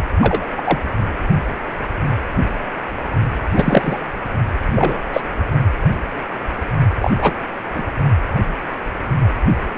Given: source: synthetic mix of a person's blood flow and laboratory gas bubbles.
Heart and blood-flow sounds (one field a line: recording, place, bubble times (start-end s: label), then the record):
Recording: Doppler ultrasound of blood flow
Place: precordium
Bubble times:
0.21-0.46 s: bubbles
0.56-0.79 s: bubbles
3.55-3.99 s: bubbles
4.66-4.98 s: bubbles
5.12-5.21 s: bubbles
7.00-7.10 s: bubbles
7.18-7.34 s: bubbles
7.75-7.85 s: bubbles
From the record:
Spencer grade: 3 (all of the cardiac periods contain showers or single bubble signals, but not dominating or overriding the cardiac motion signals)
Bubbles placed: only in the low amplitude regions of the cardiac cycle